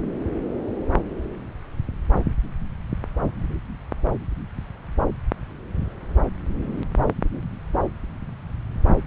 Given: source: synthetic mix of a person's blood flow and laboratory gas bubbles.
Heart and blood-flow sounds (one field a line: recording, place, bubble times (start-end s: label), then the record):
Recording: Doppler ultrasound of blood flow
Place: subclavian vein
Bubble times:
no bubbles
From the record:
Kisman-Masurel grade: 000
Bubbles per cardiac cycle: 0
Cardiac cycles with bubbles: 0%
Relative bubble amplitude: no bubbles discernible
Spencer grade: 0 (complete lack of bubble signals)